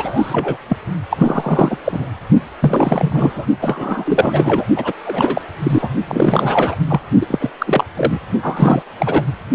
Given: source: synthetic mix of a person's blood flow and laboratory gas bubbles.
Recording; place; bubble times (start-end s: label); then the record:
Doppler ultrasound of blood flow; precordium
0.00-0.58 s: bubbles
0.69-0.77 s: bubbles
1.10-1.78 s: bubbles
1.84-2.09 s: bubbles
2.60-3.46 s: bubbles
3.61-4.66 s: bubbles
4.75-4.93 s: bubbles
5.06-5.42 s: bubbles
5.63-5.89 s: bubbles
6.08-6.75 s: bubbles
6.88-7.00 s: bubbles
7.21-7.50 s: bubbles
7.58-7.84 s: bubbles
7.96-8.19 s: bubbles
8.42-8.82 s: bubbles
8.99-9.25 s: bubbles
From the record:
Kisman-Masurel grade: 343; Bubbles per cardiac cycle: rolling drumbeat, 9 or more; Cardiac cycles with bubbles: 100%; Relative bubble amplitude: loud (0.450 to 0.775); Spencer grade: 3 (all of the cardiac periods contain showers or single bubble signals, but not dominating or overriding the cardiac motion signals); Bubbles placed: only in the low amplitude regions of the cardiac cycle